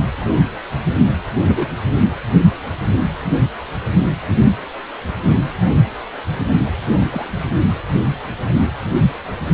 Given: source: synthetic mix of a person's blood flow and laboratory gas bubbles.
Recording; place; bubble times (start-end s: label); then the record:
Doppler ultrasound of blood flow; precordium
0.17-0.45 s: bubbles
1.47-1.67 s: bubbles
7.11-7.30 s: bubbles
From the record:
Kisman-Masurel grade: 122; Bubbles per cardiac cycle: 1 to 2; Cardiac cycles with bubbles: 10 to 50%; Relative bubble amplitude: moderate (0.250 to 0.450); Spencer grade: 2 (many but less than half of the cardiac periods contain bubble signals, singularly or in groups); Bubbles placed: only in the low amplitude regions of the cardiac cycle